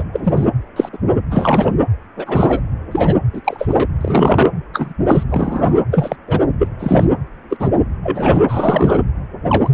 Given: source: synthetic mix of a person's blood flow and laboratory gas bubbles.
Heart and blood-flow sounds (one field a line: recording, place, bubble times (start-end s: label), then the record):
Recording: Doppler ultrasound of blood flow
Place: precordium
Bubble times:
0.00-0.03 s: bubbles
0.13-0.48 s: bubbles
0.76-0.89 s: bubbles
0.93-0.98 s: bubbles
1.30-1.74 s: bubbles
2.17-2.61 s: bubbles
2.91-3.17 s: bubbles
3.33-3.41 s: bubbles
3.44-3.87 s: bubbles
4.00-4.50 s: bubbles
4.72-4.93 s: bubbles
5.08-5.24 s: bubbles
5.29-5.82 s: bubbles
5.92-6.16 s: bubbles
6.28-6.39 s: bubbles
6.59-6.68 s: bubbles
6.79-7.04 s: bubbles
7.49-7.69 s: bubbles
8.03-8.40 s: bubbles
8.48-9.02 s: bubbles
9.47-9.70 s: bubbles
From the record:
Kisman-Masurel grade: 243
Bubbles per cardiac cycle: several, 3 to 8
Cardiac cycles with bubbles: 100%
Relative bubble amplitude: loud (0.450 to 0.775)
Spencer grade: 3 (all of the cardiac periods contain showers or single bubble signals, but not dominating or overriding the cardiac motion signals)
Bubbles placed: anywhere in the cardiac cycle